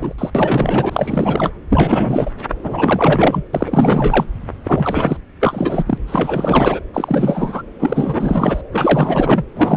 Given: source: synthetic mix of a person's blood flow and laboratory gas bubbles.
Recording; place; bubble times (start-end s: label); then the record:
Doppler ultrasound of blood flow; subclavian vein
0.00-0.14 s: bubbles
0.18-0.30 s: bubbles
0.35-1.53 s: bubbles
1.70-2.31 s: bubbles
2.63-3.44 s: bubbles
3.53-4.25 s: bubbles
4.64-5.17 s: bubbles
5.40-5.83 s: bubbles
5.86-5.98 s: bubbles
6.07-6.80 s: bubbles
6.94-7.63 s: bubbles
7.79-8.62 s: bubbles
8.71-9.44 s: bubbles
9.56-9.76 s: bubbles
From the record:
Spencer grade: 4 (maximum detectable bubble signal sounding continuously throughout systole and diastole of every cardiac period, and overriding the amplitude of the normal cardiac signals); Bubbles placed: anywhere in the cardiac cycle